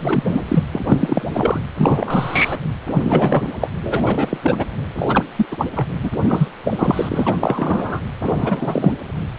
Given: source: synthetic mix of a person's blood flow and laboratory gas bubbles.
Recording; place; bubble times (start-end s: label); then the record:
Doppler ultrasound of blood flow; precordium
0.00-0.24 s: bubbles
0.28-0.42 s: bubbles
0.48-0.64 s: bubbles
0.72-1.60 s: bubbles
1.78-2.62 s: bubbles
2.91-3.48 s: bubbles
3.60-3.67 s: bubbles
3.82-4.38 s: bubbles
4.42-4.66 s: bubbles
4.95-5.25 s: bubbles
5.36-5.46 s: bubbles
5.51-5.67 s: bubbles
5.75-5.88 s: bubbles
6.03-6.11 s: bubbles
6.25-6.48 s: bubbles
6.63-7.37 s: bubbles
7.40-8.00 s: bubbles
8.22-8.93 s: bubbles
From the record:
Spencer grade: 3 (all of the cardiac periods contain showers or single bubble signals, but not dominating or overriding the cardiac motion signals); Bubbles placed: anywhere in the cardiac cycle